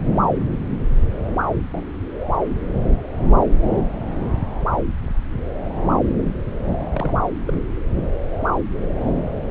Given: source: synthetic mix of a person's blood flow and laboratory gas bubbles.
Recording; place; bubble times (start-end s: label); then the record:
Doppler ultrasound of blood flow; subclavian vein
1.73-1.82 s: bubbles
6.93-7.13 s: bubbles
7.46-7.54 s: bubbles
From the record:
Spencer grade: 2 (many but less than half of the cardiac periods contain bubble signals, singularly or in groups); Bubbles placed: anywhere in the cardiac cycle